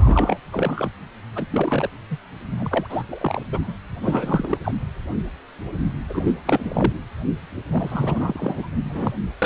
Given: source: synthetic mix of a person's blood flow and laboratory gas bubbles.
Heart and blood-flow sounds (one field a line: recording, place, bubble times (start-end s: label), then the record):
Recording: Doppler ultrasound of blood flow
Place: precordium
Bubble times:
0.00-0.38 s: bubbles
0.52-0.89 s: bubbles
1.35-1.46 s: bubbles
1.51-1.90 s: bubbles
2.10-2.17 s: bubbles
2.51-2.88 s: bubbles
2.90-3.03 s: bubbles
3.09-3.40 s: bubbles
3.52-3.74 s: bubbles
4.00-4.58 s: bubbles
4.63-4.72 s: bubbles
6.09-6.35 s: bubbles
6.45-6.93 s: bubbles
7.71-8.68 s: bubbles
8.84-9.11 s: bubbles
9.42-9.46 s: bubbles
From the record:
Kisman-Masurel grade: 332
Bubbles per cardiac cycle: rolling drumbeat, 9 or more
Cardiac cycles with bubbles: 50 to 99%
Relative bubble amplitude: moderate (0.250 to 0.450)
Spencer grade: 3 (all of the cardiac periods contain showers or single bubble signals, but not dominating or overriding the cardiac motion signals)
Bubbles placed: anywhere in the cardiac cycle